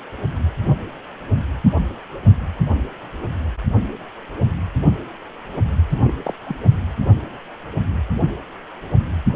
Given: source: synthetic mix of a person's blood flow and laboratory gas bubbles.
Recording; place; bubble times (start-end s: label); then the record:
Doppler ultrasound of blood flow; precordium
5.89-6.11 s: bubbles
6.25-6.34 s: bubbles
6.45-6.56 s: bubbles
From the record:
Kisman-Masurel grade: 211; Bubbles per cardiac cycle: several, 3 to 8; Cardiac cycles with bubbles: 1 to 10%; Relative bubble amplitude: barely perceptible (0.100 to 0.250); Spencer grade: 1 (occasional bubble signal discernible with the cardiac motion signal, with majority of cardiac periods free of bubbles); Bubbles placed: anywhere in the cardiac cycle